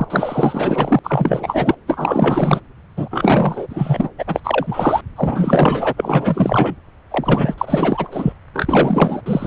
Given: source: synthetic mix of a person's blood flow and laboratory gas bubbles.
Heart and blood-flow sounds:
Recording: Doppler ultrasound of blood flow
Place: subclavian vein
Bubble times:
0.00-0.04 s: bubbles
0.10-0.99 s: bubbles
1.03-1.74 s: bubbles
1.87-2.60 s: bubbles
2.96-4.09 s: bubbles
4.18-4.24 s: bubbles
4.26-4.40 s: bubbles
4.43-5.01 s: bubbles
5.16-5.93 s: bubbles
5.96-6.75 s: bubbles
7.10-7.54 s: bubbles
7.58-8.08 s: bubbles
8.11-8.33 s: bubbles
8.53-9.21 s: bubbles
9.26-9.47 s: bubbles
From the record:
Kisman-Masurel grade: 444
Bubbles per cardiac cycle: continuous sound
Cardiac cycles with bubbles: 100%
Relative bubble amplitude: maximal (0.775 to 0.999)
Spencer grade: 4 (maximum detectable bubble signal sounding continuously throughout systole and diastole of every cardiac period, and overriding the amplitude of the normal cardiac signals)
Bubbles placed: anywhere in the cardiac cycle

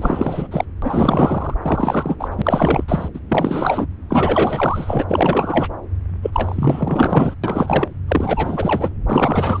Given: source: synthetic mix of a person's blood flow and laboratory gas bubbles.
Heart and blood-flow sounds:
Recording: Doppler ultrasound of blood flow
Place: subclavian vein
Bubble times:
0.00-0.47 s: bubbles
0.51-0.65 s: bubbles
0.82-1.54 s: bubbles
1.62-2.17 s: bubbles
2.19-2.28 s: bubbles
2.31-2.84 s: bubbles
2.88-3.08 s: bubbles
3.14-3.20 s: bubbles
3.29-3.86 s: bubbles
4.09-5.04 s: bubbles
5.08-5.68 s: bubbles
6.22-7.35 s: bubbles
7.43-7.88 s: bubbles
8.07-8.91 s: bubbles
9.09-9.60 s: bubbles
From the record:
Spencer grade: 4 (maximum detectable bubble signal sounding continuously throughout systole and diastole of every cardiac period, and overriding the amplitude of the normal cardiac signals)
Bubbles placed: anywhere in the cardiac cycle

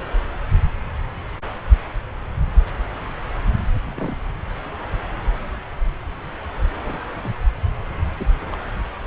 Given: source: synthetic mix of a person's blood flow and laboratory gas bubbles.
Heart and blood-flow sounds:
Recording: Doppler ultrasound of blood flow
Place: subclavian vein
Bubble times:
2.67-2.71 s: bubbles
3.85-4.15 s: bubbles
6.86-7.00 s: bubbles
7.16-7.29 s: bubbles
8.17-8.26 s: bubbles
8.52-8.57 s: bubbles
From the record:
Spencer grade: 2 (many but less than half of the cardiac periods contain bubble signals, singularly or in groups)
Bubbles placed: anywhere in the cardiac cycle

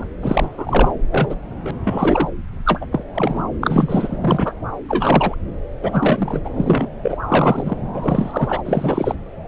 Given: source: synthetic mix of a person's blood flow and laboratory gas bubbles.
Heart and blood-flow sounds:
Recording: Doppler ultrasound of blood flow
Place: subclavian vein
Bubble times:
0.00-0.07 s: bubbles
0.20-0.91 s: bubbles
1.11-1.35 s: bubbles
1.50-1.71 s: bubbles
1.84-2.29 s: bubbles
2.65-2.86 s: bubbles
2.92-3.04 s: bubbles
3.14-3.43 s: bubbles
3.60-4.53 s: bubbles
4.88-5.36 s: bubbles
5.83-6.41 s: bubbles
6.44-6.50 s: bubbles
6.56-6.87 s: bubbles
7.03-7.17 s: bubbles
7.28-7.77 s: bubbles
7.94-8.61 s: bubbles
8.65-9.15 s: bubbles
From the record:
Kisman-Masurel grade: 243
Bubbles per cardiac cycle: several, 3 to 8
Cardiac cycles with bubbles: 100%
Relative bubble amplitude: loud (0.450 to 0.775)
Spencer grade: 3 (all of the cardiac periods contain showers or single bubble signals, but not dominating or overriding the cardiac motion signals)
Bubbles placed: anywhere in the cardiac cycle

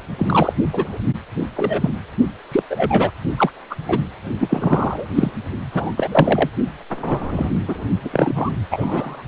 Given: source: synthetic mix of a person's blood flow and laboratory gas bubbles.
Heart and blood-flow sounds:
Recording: Doppler ultrasound of blood flow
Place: precordium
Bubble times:
0.17-0.53 s: bubbles
0.73-0.98 s: bubbles
1.56-1.91 s: bubbles
2.52-2.63 s: bubbles
2.70-3.10 s: bubbles
3.37-3.50 s: bubbles
3.70-3.75 s: bubbles
3.88-4.00 s: bubbles
4.40-5.07 s: bubbles
5.15-5.32 s: bubbles
5.73-5.92 s: bubbles
5.96-6.50 s: bubbles
7.00-7.51 s: bubbles
7.68-7.87 s: bubbles
8.04-8.10 s: bubbles
8.12-8.50 s: bubbles
8.70-9.24 s: bubbles
From the record:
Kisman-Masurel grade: 243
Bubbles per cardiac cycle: several, 3 to 8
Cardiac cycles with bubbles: 100%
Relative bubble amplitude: loud (0.450 to 0.775)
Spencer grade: 3 (all of the cardiac periods contain showers or single bubble signals, but not dominating or overriding the cardiac motion signals)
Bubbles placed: only in the low amplitude regions of the cardiac cycle

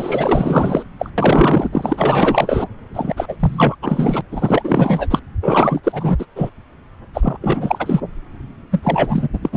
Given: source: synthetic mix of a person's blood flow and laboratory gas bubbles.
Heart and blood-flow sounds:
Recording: Doppler ultrasound of blood flow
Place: subclavian vein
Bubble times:
0.00-0.85 s: bubbles
0.99-1.10 s: bubbles
1.18-2.64 s: bubbles
2.94-3.37 s: bubbles
3.40-3.76 s: bubbles
3.82-4.21 s: bubbles
4.31-5.07 s: bubbles
5.10-5.19 s: bubbles
5.42-5.81 s: bubbles
5.83-6.25 s: bubbles
6.35-6.50 s: bubbles
7.13-7.38 s: bubbles
7.42-8.00 s: bubbles
8.71-9.28 s: bubbles
9.33-9.39 s: bubbles
9.42-9.49 s: bubbles
9.52-9.57 s: bubbles
From the record:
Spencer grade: 4 (maximum detectable bubble signal sounding continuously throughout systole and diastole of every cardiac period, and overriding the amplitude of the normal cardiac signals)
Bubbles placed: anywhere in the cardiac cycle

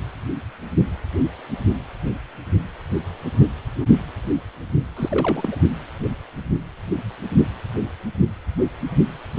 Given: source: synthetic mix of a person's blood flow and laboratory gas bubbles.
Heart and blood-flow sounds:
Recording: Doppler ultrasound of blood flow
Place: precordium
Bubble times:
4.96-5.55 s: bubbles
From the record:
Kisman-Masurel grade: 222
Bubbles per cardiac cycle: several, 3 to 8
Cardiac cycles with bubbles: 10 to 50%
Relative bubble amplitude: moderate (0.250 to 0.450)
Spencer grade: 2 (many but less than half of the cardiac periods contain bubble signals, singularly or in groups)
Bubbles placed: only in the low amplitude regions of the cardiac cycle

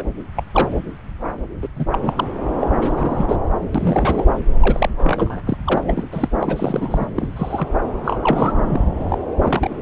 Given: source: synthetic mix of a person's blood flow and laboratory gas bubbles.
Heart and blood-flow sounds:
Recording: Doppler ultrasound of blood flow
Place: subclavian vein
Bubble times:
0.00-0.03 s: bubbles
0.35-0.43 s: bubbles
0.52-0.68 s: bubbles
1.62-1.69 s: bubbles
1.75-1.85 s: bubbles
1.92-2.28 s: bubbles
2.60-2.68 s: bubbles
2.81-3.36 s: bubbles
3.75-4.25 s: bubbles
4.62-5.40 s: bubbles
5.46-5.58 s: bubbles
5.67-5.84 s: bubbles
5.87-6.04 s: bubbles
6.12-6.28 s: bubbles
6.41-7.07 s: bubbles
7.16-7.29 s: bubbles
7.36-7.67 s: bubbles
8.04-8.16 s: bubbles
8.21-8.53 s: bubbles
8.67-8.89 s: bubbles
9.00-9.19 s: bubbles
9.42-9.82 s: bubbles
From the record:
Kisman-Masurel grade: 242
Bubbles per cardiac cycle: several, 3 to 8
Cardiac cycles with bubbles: 100%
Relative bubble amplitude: moderate (0.250 to 0.450)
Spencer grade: 3 (all of the cardiac periods contain showers or single bubble signals, but not dominating or overriding the cardiac motion signals)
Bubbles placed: anywhere in the cardiac cycle

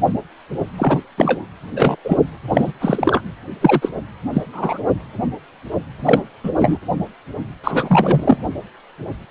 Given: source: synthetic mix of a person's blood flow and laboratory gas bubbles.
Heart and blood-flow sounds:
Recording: Doppler ultrasound of blood flow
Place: precordium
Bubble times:
0.76-1.01 s: bubbles
1.17-1.45 s: bubbles
1.76-1.96 s: bubbles
2.04-2.17 s: bubbles
2.50-2.73 s: bubbles
2.80-3.21 s: bubbles
3.60-3.89 s: bubbles
4.33-4.42 s: bubbles
4.53-4.79 s: bubbles
6.04-6.21 s: bubbles
6.43-6.51 s: bubbles
6.58-6.78 s: bubbles
7.63-8.38 s: bubbles
From the record:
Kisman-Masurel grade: 233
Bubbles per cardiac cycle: several, 3 to 8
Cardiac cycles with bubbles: 50 to 99%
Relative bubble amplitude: loud (0.450 to 0.775)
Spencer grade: 3 (all of the cardiac periods contain showers or single bubble signals, but not dominating or overriding the cardiac motion signals)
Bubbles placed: anywhere in the cardiac cycle

